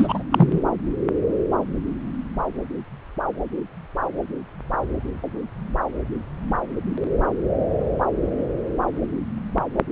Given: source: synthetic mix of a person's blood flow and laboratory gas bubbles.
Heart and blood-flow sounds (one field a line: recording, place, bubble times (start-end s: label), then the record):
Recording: Doppler ultrasound of blood flow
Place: subclavian vein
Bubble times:
0.00-0.23 s: bubbles
0.30-0.60 s: bubbles
From the record:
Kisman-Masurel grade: 213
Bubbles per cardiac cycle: several, 3 to 8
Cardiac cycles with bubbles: 1 to 10%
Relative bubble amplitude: loud (0.450 to 0.775)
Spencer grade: 1 (occasional bubble signal discernible with the cardiac motion signal, with majority of cardiac periods free of bubbles)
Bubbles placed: anywhere in the cardiac cycle